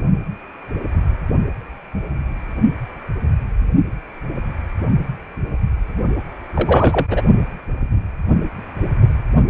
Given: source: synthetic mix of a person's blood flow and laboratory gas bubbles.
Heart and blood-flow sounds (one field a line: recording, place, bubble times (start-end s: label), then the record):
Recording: Doppler ultrasound of blood flow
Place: precordium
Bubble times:
6.55-7.06 s: bubbles
7.11-7.22 s: bubbles
From the record:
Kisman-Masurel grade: 213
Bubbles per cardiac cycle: several, 3 to 8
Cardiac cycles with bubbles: 1 to 10%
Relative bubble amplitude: loud (0.450 to 0.775)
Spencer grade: 1 (occasional bubble signal discernible with the cardiac motion signal, with majority of cardiac periods free of bubbles)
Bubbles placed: only in the low amplitude regions of the cardiac cycle